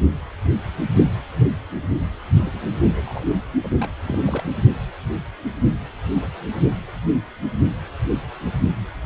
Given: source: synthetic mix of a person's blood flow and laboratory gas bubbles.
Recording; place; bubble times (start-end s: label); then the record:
Doppler ultrasound of blood flow; precordium
2.42-3.25 s: bubbles
3.29-3.35 s: bubbles
3.64-3.69 s: bubbles
3.80-3.89 s: bubbles
4.08-4.43 s: bubbles
From the record:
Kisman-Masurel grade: 221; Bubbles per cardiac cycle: several, 3 to 8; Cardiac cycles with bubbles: 10 to 50%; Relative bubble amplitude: barely perceptible (0.100 to 0.250); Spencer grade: 2 (many but less than half of the cardiac periods contain bubble signals, singularly or in groups); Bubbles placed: only in the low amplitude regions of the cardiac cycle